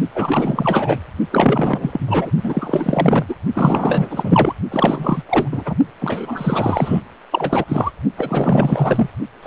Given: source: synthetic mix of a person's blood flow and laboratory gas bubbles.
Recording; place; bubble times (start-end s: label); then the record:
Doppler ultrasound of blood flow; precordium
0.15-0.97 s: bubbles
1.30-2.31 s: bubbles
2.43-3.24 s: bubbles
3.29-3.35 s: bubbles
3.54-4.54 s: bubbles
4.71-5.22 s: bubbles
5.29-5.48 s: bubbles
5.51-5.75 s: bubbles
6.01-7.00 s: bubbles
7.30-7.64 s: bubbles
7.68-7.90 s: bubbles
8.16-9.10 s: bubbles
9.42-9.47 s: bubbles
From the record:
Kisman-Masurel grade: 444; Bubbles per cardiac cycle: continuous sound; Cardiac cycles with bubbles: 100%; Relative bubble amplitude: maximal (0.775 to 0.999); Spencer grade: 4 (maximum detectable bubble signal sounding continuously throughout systole and diastole of every cardiac period, and overriding the amplitude of the normal cardiac signals); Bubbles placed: only in the low amplitude regions of the cardiac cycle